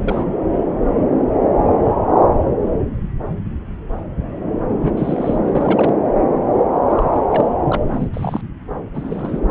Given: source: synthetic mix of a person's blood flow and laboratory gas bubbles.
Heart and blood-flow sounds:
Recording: Doppler ultrasound of blood flow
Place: subclavian vein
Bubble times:
0.02-0.26 s: bubbles
4.81-4.92 s: bubbles
4.97-5.38 s: bubbles
5.44-5.96 s: bubbles
6.90-7.20 s: bubbles
7.30-7.49 s: bubbles
7.64-8.09 s: bubbles
8.13-8.41 s: bubbles
8.94-9.40 s: bubbles
From the record:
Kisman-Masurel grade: 222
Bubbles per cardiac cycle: several, 3 to 8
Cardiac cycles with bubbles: 10 to 50%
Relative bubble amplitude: moderate (0.250 to 0.450)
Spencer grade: 2 (many but less than half of the cardiac periods contain bubble signals, singularly or in groups)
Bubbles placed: anywhere in the cardiac cycle

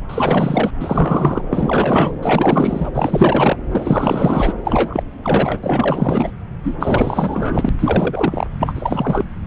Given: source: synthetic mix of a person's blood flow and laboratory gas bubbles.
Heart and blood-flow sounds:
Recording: Doppler ultrasound of blood flow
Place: subclavian vein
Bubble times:
0.09-0.70 s: bubbles
0.80-1.42 s: bubbles
1.50-2.12 s: bubbles
2.23-2.90 s: bubbles
2.93-3.56 s: bubbles
3.71-4.53 s: bubbles
4.64-5.03 s: bubbles
5.22-5.59 s: bubbles
5.63-6.30 s: bubbles
6.63-7.69 s: bubbles
7.78-8.47 s: bubbles
8.60-9.25 s: bubbles
From the record:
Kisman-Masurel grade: 444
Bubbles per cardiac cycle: continuous sound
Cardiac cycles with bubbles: 100%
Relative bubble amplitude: maximal (0.775 to 0.999)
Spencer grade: 4 (maximum detectable bubble signal sounding continuously throughout systole and diastole of every cardiac period, and overriding the amplitude of the normal cardiac signals)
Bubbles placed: anywhere in the cardiac cycle

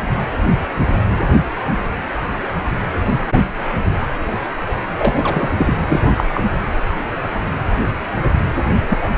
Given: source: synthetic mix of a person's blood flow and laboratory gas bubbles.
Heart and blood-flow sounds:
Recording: Doppler ultrasound of blood flow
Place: precordium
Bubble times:
4.98-5.54 s: bubbles
5.58-5.79 s: bubbles
5.87-6.24 s: bubbles
6.33-6.43 s: bubbles
8.89-8.98 s: bubbles
9.02-9.09 s: bubbles
From the record:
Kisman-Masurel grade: 222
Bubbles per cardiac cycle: several, 3 to 8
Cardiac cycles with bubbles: 10 to 50%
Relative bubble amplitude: moderate (0.250 to 0.450)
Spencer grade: 2 (many but less than half of the cardiac periods contain bubble signals, singularly or in groups)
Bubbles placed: anywhere in the cardiac cycle

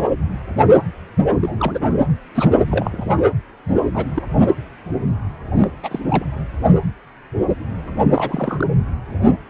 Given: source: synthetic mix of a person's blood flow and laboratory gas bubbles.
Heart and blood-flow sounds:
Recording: Doppler ultrasound of blood flow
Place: precordium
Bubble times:
1.41-2.06 s: bubbles
2.34-2.50 s: bubbles
2.71-3.10 s: bubbles
3.94-4.05 s: bubbles
4.15-4.22 s: bubbles
5.55-5.71 s: bubbles
5.83-6.00 s: bubbles
6.09-6.25 s: bubbles
8.15-8.67 s: bubbles
From the record:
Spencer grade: 2 (many but less than half of the cardiac periods contain bubble signals, singularly or in groups)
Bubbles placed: anywhere in the cardiac cycle

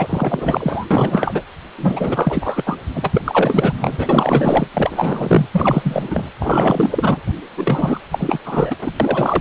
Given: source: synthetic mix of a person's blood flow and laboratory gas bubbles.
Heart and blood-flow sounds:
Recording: Doppler ultrasound of blood flow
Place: precordium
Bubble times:
0.00-0.86 s: bubbles
0.91-1.43 s: bubbles
1.77-2.79 s: bubbles
2.94-3.74 s: bubbles
3.79-4.68 s: bubbles
4.74-5.46 s: bubbles
5.52-6.31 s: bubbles
6.39-7.20 s: bubbles
7.57-7.99 s: bubbles
8.12-8.39 s: bubbles
8.45-8.77 s: bubbles
8.82-8.91 s: bubbles
9.00-9.41 s: bubbles
From the record:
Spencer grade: 4 (maximum detectable bubble signal sounding continuously throughout systole and diastole of every cardiac period, and overriding the amplitude of the normal cardiac signals)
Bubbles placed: anywhere in the cardiac cycle

